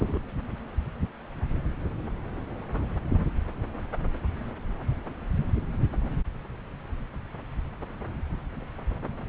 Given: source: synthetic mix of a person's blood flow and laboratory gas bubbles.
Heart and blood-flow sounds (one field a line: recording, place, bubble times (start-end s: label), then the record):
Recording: Doppler ultrasound of blood flow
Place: subclavian vein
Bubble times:
0.00-0.18 s: bubbles
From the record:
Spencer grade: 1 (occasional bubble signal discernible with the cardiac motion signal, with majority of cardiac periods free of bubbles)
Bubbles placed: anywhere in the cardiac cycle